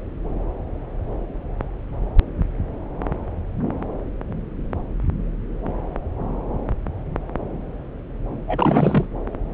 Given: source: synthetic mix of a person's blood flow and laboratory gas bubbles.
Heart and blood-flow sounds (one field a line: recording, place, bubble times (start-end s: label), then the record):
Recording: Doppler ultrasound of blood flow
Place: subclavian vein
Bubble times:
8.47-9.07 s: bubbles
From the record:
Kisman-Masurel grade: 212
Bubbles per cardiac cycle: several, 3 to 8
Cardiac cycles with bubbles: 1 to 10%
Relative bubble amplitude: moderate (0.250 to 0.450)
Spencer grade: 1 (occasional bubble signal discernible with the cardiac motion signal, with majority of cardiac periods free of bubbles)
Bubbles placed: anywhere in the cardiac cycle